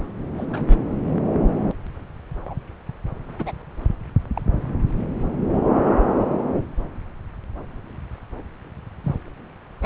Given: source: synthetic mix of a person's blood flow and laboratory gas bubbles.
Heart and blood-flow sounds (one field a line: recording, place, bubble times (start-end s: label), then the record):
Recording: Doppler ultrasound of blood flow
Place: subclavian vein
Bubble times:
0.38-0.47 s: bubbles
0.50-0.79 s: bubbles
2.46-2.54 s: bubbles
3.38-3.52 s: bubbles
4.33-4.42 s: bubbles
9.04-9.15 s: bubbles
9.81-9.85 s: bubbles
From the record:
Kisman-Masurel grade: 122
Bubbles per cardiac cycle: 1 to 2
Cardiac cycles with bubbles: 10 to 50%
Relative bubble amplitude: moderate (0.250 to 0.450)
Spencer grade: 2 (many but less than half of the cardiac periods contain bubble signals, singularly or in groups)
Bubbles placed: anywhere in the cardiac cycle